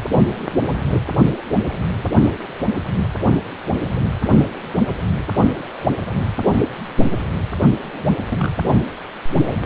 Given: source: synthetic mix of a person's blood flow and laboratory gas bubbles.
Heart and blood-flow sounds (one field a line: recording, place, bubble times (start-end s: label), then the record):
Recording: Doppler ultrasound of blood flow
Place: precordium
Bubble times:
7.83-8.15 s: bubbles
8.29-8.52 s: bubbles
From the record:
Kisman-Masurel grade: 211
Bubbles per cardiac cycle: several, 3 to 8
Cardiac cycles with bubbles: 1 to 10%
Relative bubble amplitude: barely perceptible (0.100 to 0.250)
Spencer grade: 1 (occasional bubble signal discernible with the cardiac motion signal, with majority of cardiac periods free of bubbles)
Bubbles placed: only in the low amplitude regions of the cardiac cycle